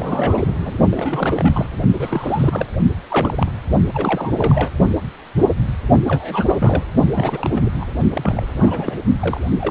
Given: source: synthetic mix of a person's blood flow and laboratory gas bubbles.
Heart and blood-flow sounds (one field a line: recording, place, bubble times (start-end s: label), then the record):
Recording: Doppler ultrasound of blood flow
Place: precordium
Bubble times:
0.00-0.78 s: bubbles
0.91-1.66 s: bubbles
1.98-2.66 s: bubbles
3.08-3.32 s: bubbles
3.35-3.50 s: bubbles
3.93-4.32 s: bubbles
4.37-4.70 s: bubbles
6.08-6.45 s: bubbles
6.48-6.83 s: bubbles
7.15-7.71 s: bubbles
7.80-7.86 s: bubbles
8.13-8.46 s: bubbles
8.55-8.97 s: bubbles
9.20-9.41 s: bubbles
9.46-9.51 s: bubbles
9.60-9.71 s: bubbles
From the record:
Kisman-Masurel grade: 332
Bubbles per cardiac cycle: rolling drumbeat, 9 or more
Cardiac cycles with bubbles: 50 to 99%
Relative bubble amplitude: moderate (0.250 to 0.450)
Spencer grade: 3 (all of the cardiac periods contain showers or single bubble signals, but not dominating or overriding the cardiac motion signals)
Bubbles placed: only in the low amplitude regions of the cardiac cycle